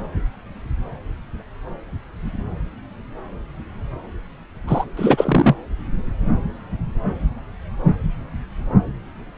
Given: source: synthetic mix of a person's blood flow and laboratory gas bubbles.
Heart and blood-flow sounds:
Doppler ultrasound of blood flow; subclavian vein
4.67-4.84 s: bubbles
4.96-5.55 s: bubbles
From the record:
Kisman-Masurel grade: 213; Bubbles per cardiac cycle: several, 3 to 8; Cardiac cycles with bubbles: 1 to 10%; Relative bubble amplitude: loud (0.450 to 0.775); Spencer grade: 1 (occasional bubble signal discernible with the cardiac motion signal, with majority of cardiac periods free of bubbles); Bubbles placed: anywhere in the cardiac cycle

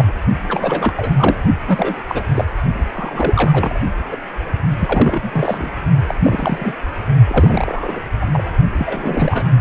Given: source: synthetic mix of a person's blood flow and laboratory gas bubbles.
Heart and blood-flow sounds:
Doppler ultrasound of blood flow; precordium
0.00-0.13 s: bubbles
0.47-0.94 s: bubbles
0.97-1.43 s: bubbles
1.68-1.94 s: bubbles
2.08-2.23 s: bubbles
2.35-2.44 s: bubbles
2.94-3.79 s: bubbles
4.11-4.17 s: bubbles
4.80-5.77 s: bubbles
6.06-6.14 s: bubbles
6.19-6.76 s: bubbles
7.27-8.00 s: bubbles
8.21-8.26 s: bubbles
8.33-8.44 s: bubbles
8.78-9.43 s: bubbles
From the record:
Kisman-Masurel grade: 342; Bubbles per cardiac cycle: rolling drumbeat, 9 or more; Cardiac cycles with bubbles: 100%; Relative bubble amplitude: moderate (0.250 to 0.450); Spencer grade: 3 (all of the cardiac periods contain showers or single bubble signals, but not dominating or overriding the cardiac motion signals); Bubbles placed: only in the low amplitude regions of the cardiac cycle

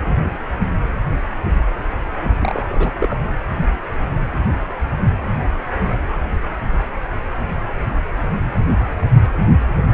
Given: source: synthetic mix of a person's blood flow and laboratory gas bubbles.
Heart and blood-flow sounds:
Doppler ultrasound of blood flow; precordium
2.40-2.91 s: bubbles
3.00-3.21 s: bubbles
From the record:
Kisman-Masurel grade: 212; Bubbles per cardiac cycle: several, 3 to 8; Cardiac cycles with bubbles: 1 to 10%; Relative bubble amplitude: moderate (0.250 to 0.450); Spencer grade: 1 (occasional bubble signal discernible with the cardiac motion signal, with majority of cardiac periods free of bubbles); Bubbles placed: only in the low amplitude regions of the cardiac cycle

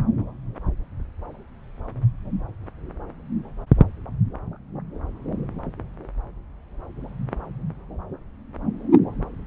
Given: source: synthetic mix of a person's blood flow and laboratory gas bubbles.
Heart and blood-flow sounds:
Doppler ultrasound of blood flow; subclavian vein
no bubbles
From the record:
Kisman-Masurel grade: 000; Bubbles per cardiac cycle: 0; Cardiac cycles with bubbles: 0%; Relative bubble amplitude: no bubbles discernible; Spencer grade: 0 (complete lack of bubble signals)

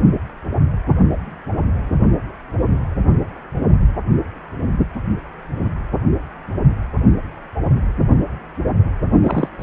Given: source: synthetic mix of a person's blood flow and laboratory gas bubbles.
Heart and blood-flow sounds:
Doppler ultrasound of blood flow; precordium
9.22-9.49 s: bubbles
9.59-9.63 s: bubbles
From the record:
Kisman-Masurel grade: 222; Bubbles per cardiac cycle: several, 3 to 8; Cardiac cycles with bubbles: 10 to 50%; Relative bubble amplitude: moderate (0.250 to 0.450); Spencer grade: 2 (many but less than half of the cardiac periods contain bubble signals, singularly or in groups); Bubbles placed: only in the low amplitude regions of the cardiac cycle

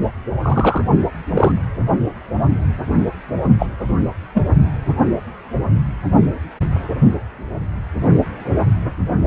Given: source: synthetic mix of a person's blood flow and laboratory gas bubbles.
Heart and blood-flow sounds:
Doppler ultrasound of blood flow; precordium
0.42-0.85 s: bubbles
1.35-1.52 s: bubbles
3.58-3.67 s: bubbles
4.34-4.42 s: bubbles
From the record:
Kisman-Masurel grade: 123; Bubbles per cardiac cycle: 1 to 2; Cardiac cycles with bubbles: 10 to 50%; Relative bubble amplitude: loud (0.450 to 0.775); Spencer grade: 2 (many but less than half of the cardiac periods contain bubble signals, singularly or in groups); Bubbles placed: only in the low amplitude regions of the cardiac cycle

